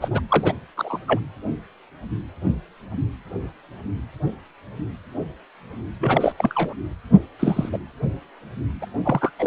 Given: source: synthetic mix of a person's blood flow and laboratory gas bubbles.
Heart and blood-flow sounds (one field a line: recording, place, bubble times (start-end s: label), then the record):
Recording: Doppler ultrasound of blood flow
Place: precordium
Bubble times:
0.01-0.21 s: bubbles
0.29-0.52 s: bubbles
0.76-0.98 s: bubbles
1.07-1.20 s: bubbles
6.00-6.32 s: bubbles
6.38-6.74 s: bubbles
7.39-7.69 s: bubbles
7.73-7.78 s: bubbles
8.81-8.86 s: bubbles
9.03-9.31 s: bubbles
9.39-9.47 s: bubbles
From the record:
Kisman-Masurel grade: 222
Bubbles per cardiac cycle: several, 3 to 8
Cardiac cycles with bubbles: 10 to 50%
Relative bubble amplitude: moderate (0.250 to 0.450)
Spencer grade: 2 (many but less than half of the cardiac periods contain bubble signals, singularly or in groups)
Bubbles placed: anywhere in the cardiac cycle